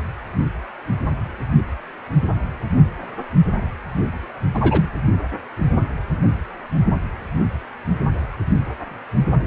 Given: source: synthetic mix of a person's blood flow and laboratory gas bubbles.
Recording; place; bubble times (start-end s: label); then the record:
Doppler ultrasound of blood flow; precordium
4.54-4.91 s: bubbles
From the record:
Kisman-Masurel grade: 213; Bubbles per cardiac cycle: several, 3 to 8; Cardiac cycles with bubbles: 1 to 10%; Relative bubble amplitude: loud (0.450 to 0.775); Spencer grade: 1 (occasional bubble signal discernible with the cardiac motion signal, with majority of cardiac periods free of bubbles); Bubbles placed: only in the low amplitude regions of the cardiac cycle